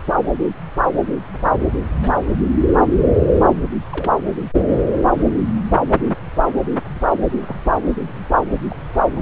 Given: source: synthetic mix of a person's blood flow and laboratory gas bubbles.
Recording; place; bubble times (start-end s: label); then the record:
Doppler ultrasound of blood flow; subclavian vein
2.02-2.10 s: bubbles
3.92-4.11 s: bubbles
7.41-7.56 s: bubbles
8.68-8.76 s: bubbles
9.16-9.21 s: bubbles
From the record:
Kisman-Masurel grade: 121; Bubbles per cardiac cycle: 1 to 2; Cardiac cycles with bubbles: 10 to 50%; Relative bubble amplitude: barely perceptible (0.100 to 0.250); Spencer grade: 2 (many but less than half of the cardiac periods contain bubble signals, singularly or in groups); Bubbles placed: anywhere in the cardiac cycle